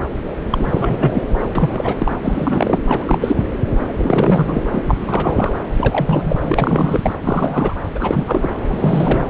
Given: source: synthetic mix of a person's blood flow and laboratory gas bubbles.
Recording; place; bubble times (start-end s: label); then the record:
Doppler ultrasound of blood flow; subclavian vein
0.00-0.08 s: bubbles
0.51-1.24 s: bubbles
1.55-2.15 s: bubbles
2.22-2.79 s: bubbles
2.88-3.44 s: bubbles
3.76-4.62 s: bubbles
4.71-4.82 s: bubbles
4.88-4.94 s: bubbles
5.00-5.57 s: bubbles
5.78-7.14 s: bubbles
7.23-7.74 s: bubbles
7.94-8.50 s: bubbles
8.65-9.26 s: bubbles
From the record:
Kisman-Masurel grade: 343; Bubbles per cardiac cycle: rolling drumbeat, 9 or more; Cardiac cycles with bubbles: 100%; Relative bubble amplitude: loud (0.450 to 0.775); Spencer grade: 3 (all of the cardiac periods contain showers or single bubble signals, but not dominating or overriding the cardiac motion signals); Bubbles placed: anywhere in the cardiac cycle